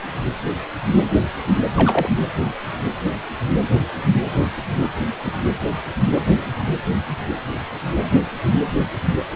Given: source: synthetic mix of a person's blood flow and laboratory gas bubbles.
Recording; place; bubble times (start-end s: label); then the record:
Doppler ultrasound of blood flow; precordium
1.77-2.08 s: bubbles
5.23-5.33 s: bubbles
From the record:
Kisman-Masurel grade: 122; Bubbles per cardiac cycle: 1 to 2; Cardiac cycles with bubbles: 10 to 50%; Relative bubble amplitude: moderate (0.250 to 0.450); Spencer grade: 2 (many but less than half of the cardiac periods contain bubble signals, singularly or in groups); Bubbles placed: anywhere in the cardiac cycle